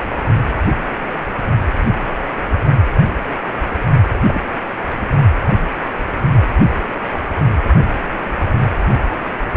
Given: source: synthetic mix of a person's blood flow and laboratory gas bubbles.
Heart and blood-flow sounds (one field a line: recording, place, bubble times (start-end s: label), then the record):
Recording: Doppler ultrasound of blood flow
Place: precordium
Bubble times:
4.28-4.42 s: bubbles
From the record:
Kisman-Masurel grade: 112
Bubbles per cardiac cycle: 1 to 2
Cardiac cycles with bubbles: 1 to 10%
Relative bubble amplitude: moderate (0.250 to 0.450)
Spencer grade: 1 (occasional bubble signal discernible with the cardiac motion signal, with majority of cardiac periods free of bubbles)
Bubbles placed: only in the low amplitude regions of the cardiac cycle